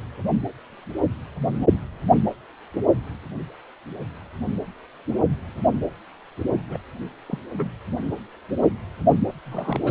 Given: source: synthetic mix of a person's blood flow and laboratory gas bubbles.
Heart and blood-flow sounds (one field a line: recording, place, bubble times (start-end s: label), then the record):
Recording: Doppler ultrasound of blood flow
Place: precordium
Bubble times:
6.69-6.77 s: bubbles
7.28-7.38 s: bubbles
7.57-7.70 s: bubbles
9.46-9.79 s: bubbles
9.85-9.91 s: bubbles
From the record:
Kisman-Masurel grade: 221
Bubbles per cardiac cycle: several, 3 to 8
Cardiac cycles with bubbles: 10 to 50%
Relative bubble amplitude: barely perceptible (0.100 to 0.250)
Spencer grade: 2 (many but less than half of the cardiac periods contain bubble signals, singularly or in groups)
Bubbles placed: only in the low amplitude regions of the cardiac cycle